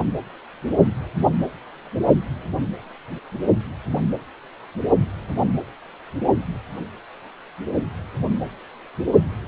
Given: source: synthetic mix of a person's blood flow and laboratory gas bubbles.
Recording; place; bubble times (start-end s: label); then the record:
Doppler ultrasound of blood flow; precordium
no bubbles
From the record:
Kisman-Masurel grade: 000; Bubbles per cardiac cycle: 0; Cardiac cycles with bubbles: 0%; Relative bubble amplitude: no bubbles discernible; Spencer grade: 0 (complete lack of bubble signals)